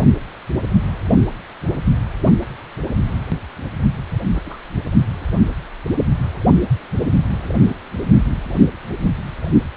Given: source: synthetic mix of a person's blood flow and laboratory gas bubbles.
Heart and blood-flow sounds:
Doppler ultrasound of blood flow; precordium
4.33-4.41 s: bubbles
4.45-4.58 s: bubbles
From the record:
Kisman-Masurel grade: 211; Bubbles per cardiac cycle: several, 3 to 8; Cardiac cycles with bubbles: 1 to 10%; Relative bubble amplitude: barely perceptible (0.100 to 0.250); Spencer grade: 1 (occasional bubble signal discernible with the cardiac motion signal, with majority of cardiac periods free of bubbles); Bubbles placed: anywhere in the cardiac cycle

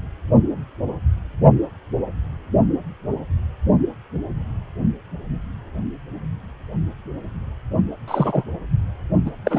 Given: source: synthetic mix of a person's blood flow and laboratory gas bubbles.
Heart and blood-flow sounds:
Doppler ultrasound of blood flow; precordium
8.07-8.44 s: bubbles
9.25-9.30 s: bubbles
9.45-9.59 s: bubbles
From the record:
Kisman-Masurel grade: 222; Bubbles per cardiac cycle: several, 3 to 8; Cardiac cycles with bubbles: 10 to 50%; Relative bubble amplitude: moderate (0.250 to 0.450); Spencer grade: 2 (many but less than half of the cardiac periods contain bubble signals, singularly or in groups); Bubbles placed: only in the low amplitude regions of the cardiac cycle

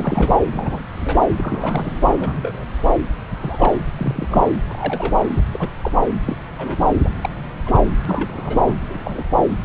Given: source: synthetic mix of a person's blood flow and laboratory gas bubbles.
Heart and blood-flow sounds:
Doppler ultrasound of blood flow; subclavian vein
0.00-0.37 s: bubbles
0.52-0.83 s: bubbles
1.04-1.21 s: bubbles
1.24-1.32 s: bubbles
1.38-1.92 s: bubbles
2.06-2.65 s: bubbles
3.35-3.78 s: bubbles
3.96-4.26 s: bubbles
4.30-4.46 s: bubbles
4.67-5.20 s: bubbles
5.38-5.42 s: bubbles
5.51-5.68 s: bubbles
5.82-5.91 s: bubbles
6.26-6.36 s: bubbles
6.58-6.83 s: bubbles
7.04-7.09 s: bubbles
7.22-7.29 s: bubbles
7.66-7.79 s: bubbles
8.05-8.75 s: bubbles
8.90-9.24 s: bubbles
From the record:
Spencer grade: 3 (all of the cardiac periods contain showers or single bubble signals, but not dominating or overriding the cardiac motion signals); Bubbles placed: anywhere in the cardiac cycle

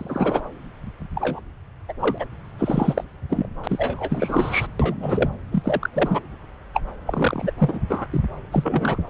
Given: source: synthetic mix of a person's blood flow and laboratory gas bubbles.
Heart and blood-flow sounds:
Doppler ultrasound of blood flow; subclavian vein
0.00-0.42 s: bubbles
1.15-1.40 s: bubbles
1.88-1.93 s: bubbles
2.00-2.25 s: bubbles
2.58-3.04 s: bubbles
3.29-3.48 s: bubbles
3.64-4.67 s: bubbles
4.79-4.95 s: bubbles
5.00-5.29 s: bubbles
5.52-5.89 s: bubbles
5.94-6.20 s: bubbles
6.74-6.81 s: bubbles
7.07-7.51 s: bubbles
7.58-7.79 s: bubbles
7.89-8.06 s: bubbles
8.13-8.21 s: bubbles
8.52-8.98 s: bubbles
From the record:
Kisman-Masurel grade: 232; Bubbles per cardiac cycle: several, 3 to 8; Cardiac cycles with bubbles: 50 to 99%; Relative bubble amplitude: moderate (0.250 to 0.450); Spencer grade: 3 (all of the cardiac periods contain showers or single bubble signals, but not dominating or overriding the cardiac motion signals); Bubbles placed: anywhere in the cardiac cycle

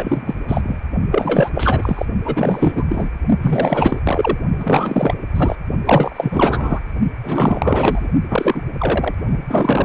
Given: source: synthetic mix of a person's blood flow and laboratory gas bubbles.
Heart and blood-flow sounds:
Doppler ultrasound of blood flow; precordium
0.00-0.35 s: bubbles
0.48-0.80 s: bubbles
1.11-1.50 s: bubbles
1.54-2.06 s: bubbles
2.25-2.85 s: bubbles
2.89-3.10 s: bubbles
3.42-4.00 s: bubbles
4.04-4.38 s: bubbles
4.59-5.15 s: bubbles
5.35-5.56 s: bubbles
5.85-6.80 s: bubbles
7.22-8.09 s: bubbles
8.29-8.62 s: bubbles
8.78-9.14 s: bubbles
9.26-9.37 s: bubbles
9.47-9.85 s: bubbles
From the record:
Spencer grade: 4 (maximum detectable bubble signal sounding continuously throughout systole and diastole of every cardiac period, and overriding the amplitude of the normal cardiac signals); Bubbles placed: only in the low amplitude regions of the cardiac cycle

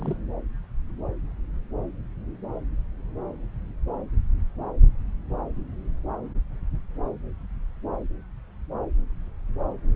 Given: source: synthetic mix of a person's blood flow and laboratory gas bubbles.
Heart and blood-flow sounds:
Doppler ultrasound of blood flow; subclavian vein
0.00-0.17 s: bubbles
From the record:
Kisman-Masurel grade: 112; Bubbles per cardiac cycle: 1 to 2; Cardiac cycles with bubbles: 1 to 10%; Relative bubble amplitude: moderate (0.250 to 0.450); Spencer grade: 1 (occasional bubble signal discernible with the cardiac motion signal, with majority of cardiac periods free of bubbles); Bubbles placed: anywhere in the cardiac cycle

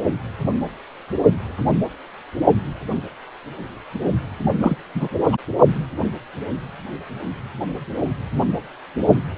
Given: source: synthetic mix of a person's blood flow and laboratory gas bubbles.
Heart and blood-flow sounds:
Doppler ultrasound of blood flow; precordium
4.57-4.77 s: bubbles
4.94-5.08 s: bubbles
5.27-5.37 s: bubbles
From the record:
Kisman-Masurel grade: 212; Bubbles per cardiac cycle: several, 3 to 8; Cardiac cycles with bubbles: 1 to 10%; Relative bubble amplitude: moderate (0.250 to 0.450); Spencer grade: 1 (occasional bubble signal discernible with the cardiac motion signal, with majority of cardiac periods free of bubbles); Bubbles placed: only in the low amplitude regions of the cardiac cycle

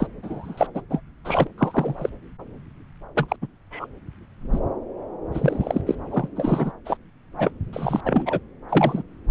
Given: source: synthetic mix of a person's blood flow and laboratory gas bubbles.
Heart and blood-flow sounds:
Doppler ultrasound of blood flow; subclavian vein
0.00-0.07 s: bubbles
0.23-0.67 s: bubbles
0.74-0.82 s: bubbles
0.90-1.00 s: bubbles
1.24-1.47 s: bubbles
1.57-2.09 s: bubbles
3.15-3.36 s: bubbles
3.42-3.46 s: bubbles
3.71-3.87 s: bubbles
4.52-4.59 s: bubbles
5.32-5.81 s: bubbles
5.86-5.95 s: bubbles
6.10-6.28 s: bubbles
6.36-6.72 s: bubbles
6.85-6.97 s: bubbles
7.38-7.51 s: bubbles
7.73-8.00 s: bubbles
8.04-8.39 s: bubbles
8.69-9.03 s: bubbles
From the record:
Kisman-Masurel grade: 232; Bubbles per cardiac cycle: several, 3 to 8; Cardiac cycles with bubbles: 50 to 99%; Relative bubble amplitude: moderate (0.250 to 0.450); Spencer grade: 3 (all of the cardiac periods contain showers or single bubble signals, but not dominating or overriding the cardiac motion signals); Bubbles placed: anywhere in the cardiac cycle

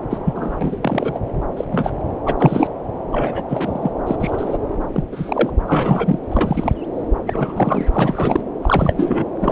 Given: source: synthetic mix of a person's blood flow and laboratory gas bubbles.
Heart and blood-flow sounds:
Doppler ultrasound of blood flow; subclavian vein
0.10-0.18 s: bubbles
0.25-0.58 s: bubbles
0.61-1.20 s: bubbles
1.56-1.65 s: bubbles
1.72-1.93 s: bubbles
2.26-2.34 s: bubbles
2.38-2.68 s: bubbles
3.12-3.43 s: bubbles
3.49-3.91 s: bubbles
4.06-4.16 s: bubbles
4.20-4.58 s: bubbles
4.92-5.04 s: bubbles
5.12-5.50 s: bubbles
5.67-6.19 s: bubbles
6.29-6.73 s: bubbles
7.26-7.85 s: bubbles
7.92-8.40 s: bubbles
8.61-9.25 s: bubbles
9.37-9.52 s: bubbles
From the record:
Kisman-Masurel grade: 243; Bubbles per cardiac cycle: several, 3 to 8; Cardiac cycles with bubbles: 100%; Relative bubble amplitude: loud (0.450 to 0.775); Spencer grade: 3 (all of the cardiac periods contain showers or single bubble signals, but not dominating or overriding the cardiac motion signals); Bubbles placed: anywhere in the cardiac cycle

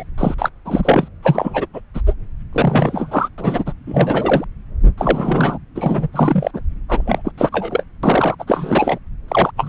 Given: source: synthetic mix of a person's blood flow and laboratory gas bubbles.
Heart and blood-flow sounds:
Doppler ultrasound of blood flow; subclavian vein
0.00-0.03 s: bubbles
0.18-0.34 s: bubbles
0.38-0.49 s: bubbles
0.65-1.08 s: bubbles
1.23-1.66 s: bubbles
1.73-1.80 s: bubbles
1.94-2.01 s: bubbles
2.06-2.14 s: bubbles
2.52-3.28 s: bubbles
3.38-3.73 s: bubbles
3.86-4.45 s: bubbles
4.98-5.58 s: bubbles
5.75-6.08 s: bubbles
6.12-6.51 s: bubbles
6.54-6.61 s: bubbles
6.89-7.32 s: bubbles
7.38-7.83 s: bubbles
8.03-8.35 s: bubbles
8.39-8.44 s: bubbles
8.47-8.98 s: bubbles
9.28-9.51 s: bubbles
9.56-9.69 s: bubbles
From the record:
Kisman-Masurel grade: 343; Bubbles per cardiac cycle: rolling drumbeat, 9 or more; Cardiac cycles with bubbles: 100%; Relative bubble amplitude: loud (0.450 to 0.775); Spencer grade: 3 (all of the cardiac periods contain showers or single bubble signals, but not dominating or overriding the cardiac motion signals); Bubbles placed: anywhere in the cardiac cycle

